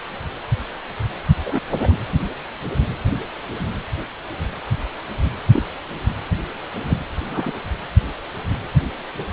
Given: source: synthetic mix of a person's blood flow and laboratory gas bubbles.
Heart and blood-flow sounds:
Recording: Doppler ultrasound of blood flow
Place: precordium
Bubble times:
1.44-1.60 s: bubbles
1.80-1.94 s: bubbles
5.46-5.63 s: bubbles
6.89-6.99 s: bubbles
7.28-7.51 s: bubbles
From the record:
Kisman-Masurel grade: 122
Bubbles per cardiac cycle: 1 to 2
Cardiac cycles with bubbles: 10 to 50%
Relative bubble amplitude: moderate (0.250 to 0.450)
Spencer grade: 2 (many but less than half of the cardiac periods contain bubble signals, singularly or in groups)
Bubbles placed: anywhere in the cardiac cycle

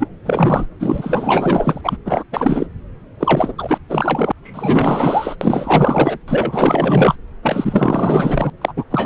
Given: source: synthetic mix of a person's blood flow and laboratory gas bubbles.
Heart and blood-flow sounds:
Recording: Doppler ultrasound of blood flow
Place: subclavian vein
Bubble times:
0.00-0.07 s: bubbles
0.23-0.66 s: bubbles
0.79-1.82 s: bubbles
1.84-1.97 s: bubbles
2.05-2.24 s: bubbles
2.32-2.67 s: bubbles
3.20-3.52 s: bubbles
3.58-3.78 s: bubbles
3.89-4.31 s: bubbles
4.43-5.35 s: bubbles
5.41-6.18 s: bubbles
6.27-7.15 s: bubbles
7.42-8.50 s: bubbles
8.61-8.73 s: bubbles
8.77-8.84 s: bubbles
8.90-9.06 s: bubbles
From the record:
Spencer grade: 4 (maximum detectable bubble signal sounding continuously throughout systole and diastole of every cardiac period, and overriding the amplitude of the normal cardiac signals)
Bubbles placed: anywhere in the cardiac cycle

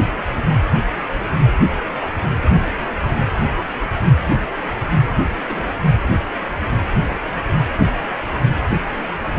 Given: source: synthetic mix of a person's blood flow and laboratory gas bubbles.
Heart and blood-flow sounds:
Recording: Doppler ultrasound of blood flow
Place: precordium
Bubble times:
5.37-5.84 s: bubbles
From the record:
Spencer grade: 1 (occasional bubble signal discernible with the cardiac motion signal, with majority of cardiac periods free of bubbles)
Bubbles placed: anywhere in the cardiac cycle

